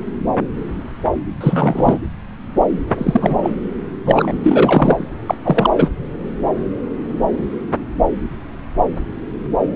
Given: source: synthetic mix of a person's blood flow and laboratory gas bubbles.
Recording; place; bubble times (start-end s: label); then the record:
Doppler ultrasound of blood flow; subclavian vein
1.41-1.99 s: bubbles
2.88-3.39 s: bubbles
3.42-3.50 s: bubbles
4.04-4.32 s: bubbles
4.43-5.08 s: bubbles
5.27-5.35 s: bubbles
5.43-5.70 s: bubbles
5.75-5.91 s: bubbles
From the record:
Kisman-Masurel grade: 223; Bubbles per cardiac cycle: several, 3 to 8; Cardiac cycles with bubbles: 10 to 50%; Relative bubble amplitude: loud (0.450 to 0.775); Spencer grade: 2 (many but less than half of the cardiac periods contain bubble signals, singularly or in groups); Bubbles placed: anywhere in the cardiac cycle